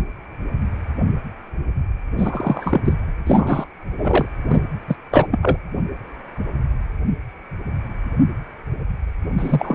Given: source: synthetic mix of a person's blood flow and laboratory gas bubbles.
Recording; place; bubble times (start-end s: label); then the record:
Doppler ultrasound of blood flow; precordium
2.17-2.80 s: bubbles
2.85-2.94 s: bubbles
3.26-3.66 s: bubbles
3.98-4.25 s: bubbles
4.49-4.60 s: bubbles
4.88-4.96 s: bubbles
5.10-5.27 s: bubbles
5.30-5.39 s: bubbles
5.42-5.57 s: bubbles
9.38-9.75 s: bubbles
From the record:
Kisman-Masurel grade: 223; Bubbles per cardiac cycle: several, 3 to 8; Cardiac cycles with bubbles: 10 to 50%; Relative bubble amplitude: loud (0.450 to 0.775); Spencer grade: 2 (many but less than half of the cardiac periods contain bubble signals, singularly or in groups); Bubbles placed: anywhere in the cardiac cycle